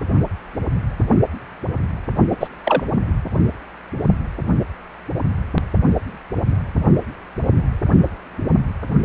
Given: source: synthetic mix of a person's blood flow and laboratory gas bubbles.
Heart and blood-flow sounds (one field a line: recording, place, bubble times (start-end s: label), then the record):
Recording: Doppler ultrasound of blood flow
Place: precordium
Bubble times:
2.31-2.36 s: bubbles
2.40-2.47 s: bubbles
2.63-2.83 s: bubbles
From the record:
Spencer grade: 1 (occasional bubble signal discernible with the cardiac motion signal, with majority of cardiac periods free of bubbles)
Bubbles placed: only in the low amplitude regions of the cardiac cycle